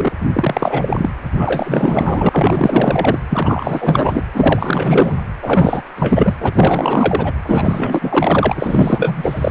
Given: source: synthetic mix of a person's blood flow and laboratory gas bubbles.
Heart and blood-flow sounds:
Doppler ultrasound of blood flow; precordium
0.00-0.12 s: bubbles
0.33-1.09 s: bubbles
1.33-3.20 s: bubbles
3.30-4.24 s: bubbles
4.33-5.23 s: bubbles
5.42-5.82 s: bubbles
5.96-6.36 s: bubbles
6.40-7.33 s: bubbles
7.42-9.51 s: bubbles
From the record:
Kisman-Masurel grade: 444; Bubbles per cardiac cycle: continuous sound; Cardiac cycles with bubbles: 100%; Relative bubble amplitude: maximal (0.775 to 0.999); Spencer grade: 4 (maximum detectable bubble signal sounding continuously throughout systole and diastole of every cardiac period, and overriding the amplitude of the normal cardiac signals); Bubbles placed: anywhere in the cardiac cycle

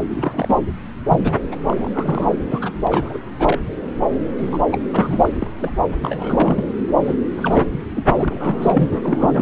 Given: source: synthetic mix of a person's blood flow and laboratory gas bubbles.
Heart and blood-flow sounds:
Doppler ultrasound of blood flow; subclavian vein
0.10-0.65 s: bubbles
1.09-1.35 s: bubbles
1.51-1.56 s: bubbles
1.67-1.89 s: bubbles
1.92-2.28 s: bubbles
2.50-2.71 s: bubbles
2.86-3.18 s: bubbles
3.39-3.58 s: bubbles
4.38-4.59 s: bubbles
4.72-4.79 s: bubbles
4.93-5.29 s: bubbles
5.32-5.51 s: bubbles
5.60-5.80 s: bubbles
6.04-6.68 s: bubbles
7.01-7.15 s: bubbles
7.36-7.66 s: bubbles
7.72-7.79 s: bubbles
7.95-8.03 s: bubbles
8.09-8.89 s: bubbles
9.03-9.41 s: bubbles
From the record:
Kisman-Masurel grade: 342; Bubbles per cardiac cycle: rolling drumbeat, 9 or more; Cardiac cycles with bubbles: 100%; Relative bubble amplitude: moderate (0.250 to 0.450); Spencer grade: 3 (all of the cardiac periods contain showers or single bubble signals, but not dominating or overriding the cardiac motion signals); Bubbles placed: anywhere in the cardiac cycle

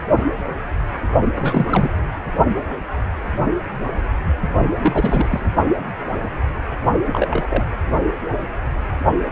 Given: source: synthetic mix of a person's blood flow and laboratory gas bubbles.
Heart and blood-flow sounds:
Doppler ultrasound of blood flow; precordium
1.35-1.90 s: bubbles
4.80-5.46 s: bubbles
7.04-7.65 s: bubbles
From the record:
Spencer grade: 2 (many but less than half of the cardiac periods contain bubble signals, singularly or in groups); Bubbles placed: only in the low amplitude regions of the cardiac cycle

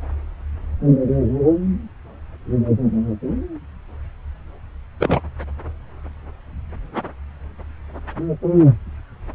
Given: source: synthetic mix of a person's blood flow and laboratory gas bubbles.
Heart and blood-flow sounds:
Doppler ultrasound of blood flow; subclavian vein
4.99-5.21 s: bubbles
From the record:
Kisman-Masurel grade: 123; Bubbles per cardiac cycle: 1 to 2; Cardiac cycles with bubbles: 10 to 50%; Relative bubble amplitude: loud (0.450 to 0.775); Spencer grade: 2 (many but less than half of the cardiac periods contain bubble signals, singularly or in groups); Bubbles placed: anywhere in the cardiac cycle

